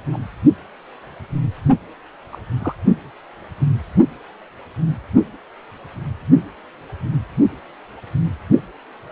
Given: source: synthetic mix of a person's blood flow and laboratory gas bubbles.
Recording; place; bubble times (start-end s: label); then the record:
Doppler ultrasound of blood flow; precordium
0.12-0.18 s: bubbles
2.32-2.38 s: bubbles
2.59-2.75 s: bubbles
From the record:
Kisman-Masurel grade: 121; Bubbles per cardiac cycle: 1 to 2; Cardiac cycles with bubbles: 10 to 50%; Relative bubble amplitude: barely perceptible (0.100 to 0.250); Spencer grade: 2 (many but less than half of the cardiac periods contain bubble signals, singularly or in groups); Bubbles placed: only in the low amplitude regions of the cardiac cycle